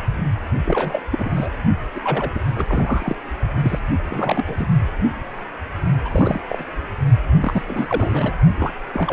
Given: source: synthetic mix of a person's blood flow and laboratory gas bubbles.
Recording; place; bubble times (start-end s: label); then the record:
Doppler ultrasound of blood flow; precordium
0.65-1.01 s: bubbles
1.11-1.51 s: bubbles
1.94-2.00 s: bubbles
2.02-2.31 s: bubbles
2.35-2.41 s: bubbles
2.56-3.16 s: bubbles
3.55-3.79 s: bubbles
3.90-4.01 s: bubbles
4.07-4.67 s: bubbles
6.04-6.40 s: bubbles
6.48-6.64 s: bubbles
7.40-7.62 s: bubbles
7.68-8.33 s: bubbles
8.58-8.73 s: bubbles
8.94-9.13 s: bubbles
From the record:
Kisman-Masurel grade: 332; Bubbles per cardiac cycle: rolling drumbeat, 9 or more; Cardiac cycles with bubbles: 50 to 99%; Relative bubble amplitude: moderate (0.250 to 0.450); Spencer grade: 3 (all of the cardiac periods contain showers or single bubble signals, but not dominating or overriding the cardiac motion signals); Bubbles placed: only in the low amplitude regions of the cardiac cycle